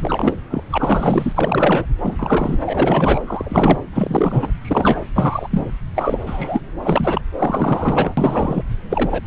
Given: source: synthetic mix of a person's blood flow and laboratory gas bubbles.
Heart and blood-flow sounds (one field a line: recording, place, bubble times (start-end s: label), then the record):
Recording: Doppler ultrasound of blood flow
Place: subclavian vein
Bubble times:
0.00-0.39 s: bubbles
0.49-0.64 s: bubbles
0.71-1.86 s: bubbles
2.01-2.58 s: bubbles
2.67-3.21 s: bubbles
3.27-3.79 s: bubbles
3.93-4.52 s: bubbles
4.61-5.02 s: bubbles
5.15-5.48 s: bubbles
5.51-5.71 s: bubbles
5.95-6.20 s: bubbles
6.26-6.61 s: bubbles
6.83-7.21 s: bubbles
7.39-8.14 s: bubbles
8.17-8.62 s: bubbles
8.89-9.22 s: bubbles
9.25-9.27 s: bubbles
From the record:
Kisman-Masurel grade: 343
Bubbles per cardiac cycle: rolling drumbeat, 9 or more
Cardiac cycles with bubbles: 100%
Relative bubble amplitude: loud (0.450 to 0.775)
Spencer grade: 3 (all of the cardiac periods contain showers or single bubble signals, but not dominating or overriding the cardiac motion signals)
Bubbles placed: anywhere in the cardiac cycle